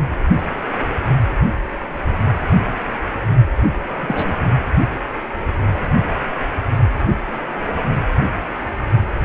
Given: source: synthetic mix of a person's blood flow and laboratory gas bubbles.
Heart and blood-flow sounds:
Doppler ultrasound of blood flow; precordium
3.99-4.38 s: bubbles
From the record:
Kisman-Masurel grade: 112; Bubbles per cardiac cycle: 1 to 2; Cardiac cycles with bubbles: 1 to 10%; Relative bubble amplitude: moderate (0.250 to 0.450); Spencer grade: 1 (occasional bubble signal discernible with the cardiac motion signal, with majority of cardiac periods free of bubbles); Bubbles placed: only in the low amplitude regions of the cardiac cycle

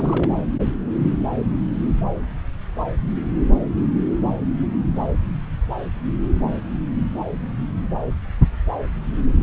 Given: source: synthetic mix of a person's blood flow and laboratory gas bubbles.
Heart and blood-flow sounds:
Doppler ultrasound of blood flow; subclavian vein
0.00-0.29 s: bubbles
From the record:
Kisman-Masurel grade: 221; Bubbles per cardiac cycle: several, 3 to 8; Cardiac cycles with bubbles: 10 to 50%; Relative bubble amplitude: barely perceptible (0.100 to 0.250); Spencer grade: 2 (many but less than half of the cardiac periods contain bubble signals, singularly or in groups); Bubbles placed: anywhere in the cardiac cycle

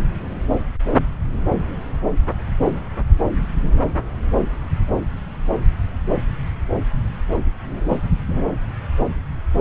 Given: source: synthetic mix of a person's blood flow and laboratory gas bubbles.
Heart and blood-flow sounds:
Doppler ultrasound of blood flow; subclavian vein
7.90-7.96 s: bubbles
8.28-8.53 s: bubbles
From the record:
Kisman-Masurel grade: 123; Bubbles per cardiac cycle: 1 to 2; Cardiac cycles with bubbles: 10 to 50%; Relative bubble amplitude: loud (0.450 to 0.775); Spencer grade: 2 (many but less than half of the cardiac periods contain bubble signals, singularly or in groups); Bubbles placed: anywhere in the cardiac cycle

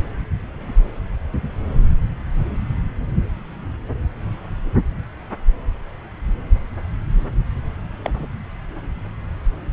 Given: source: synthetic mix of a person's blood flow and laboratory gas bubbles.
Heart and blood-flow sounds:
Doppler ultrasound of blood flow; subclavian vein
8.04-8.11 s: bubbles
8.13-8.27 s: bubbles
From the record:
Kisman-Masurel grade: 112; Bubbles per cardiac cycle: 1 to 2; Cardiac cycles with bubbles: 1 to 10%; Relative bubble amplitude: moderate (0.250 to 0.450); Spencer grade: 1 (occasional bubble signal discernible with the cardiac motion signal, with majority of cardiac periods free of bubbles); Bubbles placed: anywhere in the cardiac cycle

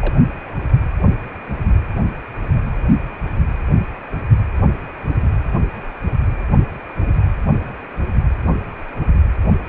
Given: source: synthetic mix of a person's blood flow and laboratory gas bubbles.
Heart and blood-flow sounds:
Doppler ultrasound of blood flow; precordium
0.00-0.13 s: bubbles
From the record:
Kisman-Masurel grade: 111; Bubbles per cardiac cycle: 1 to 2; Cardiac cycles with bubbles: 1 to 10%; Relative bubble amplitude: barely perceptible (0.100 to 0.250); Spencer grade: 1 (occasional bubble signal discernible with the cardiac motion signal, with majority of cardiac periods free of bubbles); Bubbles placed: anywhere in the cardiac cycle

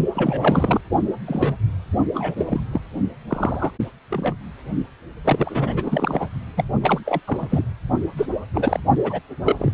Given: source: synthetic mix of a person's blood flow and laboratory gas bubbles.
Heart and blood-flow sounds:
Doppler ultrasound of blood flow; precordium
0.14-0.80 s: bubbles
1.26-1.54 s: bubbles
2.13-2.34 s: bubbles
2.37-2.60 s: bubbles
2.73-2.80 s: bubbles
3.29-3.71 s: bubbles
4.10-4.35 s: bubbles
5.25-6.27 s: bubbles
6.56-6.64 s: bubbles
6.82-7.20 s: bubbles
7.27-7.63 s: bubbles
8.17-8.26 s: bubbles
8.54-8.79 s: bubbles
9.04-9.20 s: bubbles
9.45-9.56 s: bubbles
9.59-9.73 s: bubbles
From the record:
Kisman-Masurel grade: 242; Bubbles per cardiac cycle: several, 3 to 8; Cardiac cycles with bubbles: 100%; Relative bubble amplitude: moderate (0.250 to 0.450); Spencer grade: 3 (all of the cardiac periods contain showers or single bubble signals, but not dominating or overriding the cardiac motion signals); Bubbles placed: only in the low amplitude regions of the cardiac cycle

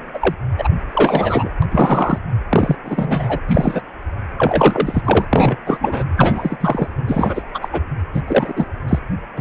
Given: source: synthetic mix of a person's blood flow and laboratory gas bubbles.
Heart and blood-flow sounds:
Doppler ultrasound of blood flow; precordium
0.13-0.34 s: bubbles
0.57-0.67 s: bubbles
0.91-1.49 s: bubbles
1.62-1.66 s: bubbles
1.72-2.19 s: bubbles
2.49-2.76 s: bubbles
2.84-3.40 s: bubbles
3.48-3.81 s: bubbles
4.38-5.01 s: bubbles
5.04-5.25 s: bubbles
5.29-5.58 s: bubbles
5.66-5.77 s: bubbles
5.80-6.04 s: bubbles
6.17-6.57 s: bubbles
6.60-6.88 s: bubbles
7.07-7.42 s: bubbles
7.54-7.68 s: bubbles
7.72-7.80 s: bubbles
8.13-8.21 s: bubbles
8.27-8.54 s: bubbles
8.56-8.65 s: bubbles
8.88-8.99 s: bubbles
9.36-9.41 s: bubbles
From the record:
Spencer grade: 3 (all of the cardiac periods contain showers or single bubble signals, but not dominating or overriding the cardiac motion signals); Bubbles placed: anywhere in the cardiac cycle

